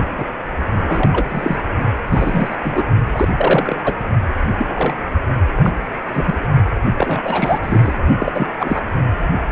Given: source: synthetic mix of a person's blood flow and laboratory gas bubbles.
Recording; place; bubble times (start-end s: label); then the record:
Doppler ultrasound of blood flow; precordium
0.15-0.24 s: bubbles
0.86-1.57 s: bubbles
2.12-2.56 s: bubbles
2.64-2.84 s: bubbles
3.12-3.28 s: bubbles
3.37-3.76 s: bubbles
3.84-3.93 s: bubbles
4.42-4.94 s: bubbles
5.60-5.72 s: bubbles
6.12-6.35 s: bubbles
6.97-7.59 s: bubbles
7.62-7.99 s: bubbles
8.20-8.48 s: bubbles
8.60-8.86 s: bubbles
From the record:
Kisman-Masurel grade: 242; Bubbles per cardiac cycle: several, 3 to 8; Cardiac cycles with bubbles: 100%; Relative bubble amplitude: moderate (0.250 to 0.450); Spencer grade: 3 (all of the cardiac periods contain showers or single bubble signals, but not dominating or overriding the cardiac motion signals); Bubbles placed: only in the low amplitude regions of the cardiac cycle